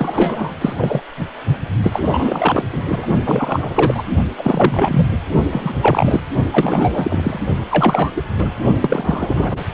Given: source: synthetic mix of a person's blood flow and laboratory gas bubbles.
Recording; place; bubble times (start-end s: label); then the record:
Doppler ultrasound of blood flow; precordium
0.00-0.56 s: bubbles
0.61-0.73 s: bubbles
0.77-1.00 s: bubbles
1.83-2.00 s: bubbles
2.05-2.65 s: bubbles
2.72-2.83 s: bubbles
2.88-3.06 s: bubbles
3.25-4.03 s: bubbles
4.37-5.07 s: bubbles
5.51-5.73 s: bubbles
5.81-6.20 s: bubbles
6.51-7.39 s: bubbles
7.71-8.12 s: bubbles
8.15-8.22 s: bubbles
8.38-8.51 s: bubbles
8.80-9.64 s: bubbles
From the record:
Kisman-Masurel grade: 343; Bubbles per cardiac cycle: rolling drumbeat, 9 or more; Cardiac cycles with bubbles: 100%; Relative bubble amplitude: loud (0.450 to 0.775); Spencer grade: 3 (all of the cardiac periods contain showers or single bubble signals, but not dominating or overriding the cardiac motion signals); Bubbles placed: only in the low amplitude regions of the cardiac cycle